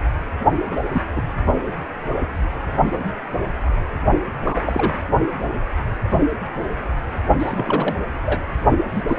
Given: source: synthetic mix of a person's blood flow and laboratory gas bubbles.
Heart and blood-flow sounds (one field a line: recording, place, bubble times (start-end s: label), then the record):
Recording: Doppler ultrasound of blood flow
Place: precordium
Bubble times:
0.71-0.76 s: bubbles
0.92-1.02 s: bubbles
1.16-1.22 s: bubbles
4.42-4.62 s: bubbles
4.66-5.06 s: bubbles
7.38-7.95 s: bubbles
8.25-8.41 s: bubbles
8.94-9.02 s: bubbles
9.07-9.19 s: bubbles
From the record:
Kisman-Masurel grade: 222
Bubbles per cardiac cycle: several, 3 to 8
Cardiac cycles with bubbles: 10 to 50%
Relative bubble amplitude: moderate (0.250 to 0.450)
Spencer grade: 2 (many but less than half of the cardiac periods contain bubble signals, singularly or in groups)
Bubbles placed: only in the low amplitude regions of the cardiac cycle